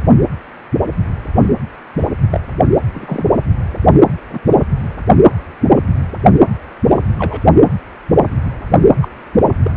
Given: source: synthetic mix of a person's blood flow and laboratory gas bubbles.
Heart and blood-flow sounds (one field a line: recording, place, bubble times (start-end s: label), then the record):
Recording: Doppler ultrasound of blood flow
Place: precordium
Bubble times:
1.99-2.08 s: bubbles
2.30-2.41 s: bubbles
2.94-3.25 s: bubbles
4.30-4.39 s: bubbles
4.50-4.57 s: bubbles
7.19-7.44 s: bubbles
9.02-9.08 s: bubbles
9.63-9.71 s: bubbles
From the record:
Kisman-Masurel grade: 122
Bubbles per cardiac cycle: 1 to 2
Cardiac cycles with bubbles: 10 to 50%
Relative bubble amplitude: moderate (0.250 to 0.450)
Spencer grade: 2 (many but less than half of the cardiac periods contain bubble signals, singularly or in groups)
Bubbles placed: anywhere in the cardiac cycle